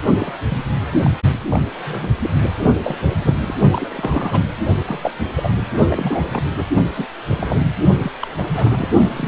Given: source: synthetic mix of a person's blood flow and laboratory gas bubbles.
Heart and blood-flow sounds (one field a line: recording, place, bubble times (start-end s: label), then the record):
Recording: Doppler ultrasound of blood flow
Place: precordium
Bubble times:
0.18-0.38 s: bubbles
0.49-0.58 s: bubbles
0.92-1.01 s: bubbles
1.03-1.10 s: bubbles
1.49-1.60 s: bubbles
1.79-2.14 s: bubbles
2.23-2.30 s: bubbles
2.83-2.95 s: bubbles
3.18-3.41 s: bubbles
3.48-3.55 s: bubbles
3.72-4.42 s: bubbles
4.84-5.11 s: bubbles
5.36-5.50 s: bubbles
5.90-6.64 s: bubbles
6.95-7.06 s: bubbles
7.28-7.67 s: bubbles
8.02-8.12 s: bubbles
8.22-8.28 s: bubbles
8.37-8.45 s: bubbles
8.48-8.88 s: bubbles
9.09-9.28 s: bubbles
From the record:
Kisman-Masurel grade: 242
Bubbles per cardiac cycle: several, 3 to 8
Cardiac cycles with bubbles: 100%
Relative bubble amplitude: moderate (0.250 to 0.450)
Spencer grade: 3 (all of the cardiac periods contain showers or single bubble signals, but not dominating or overriding the cardiac motion signals)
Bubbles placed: only in the low amplitude regions of the cardiac cycle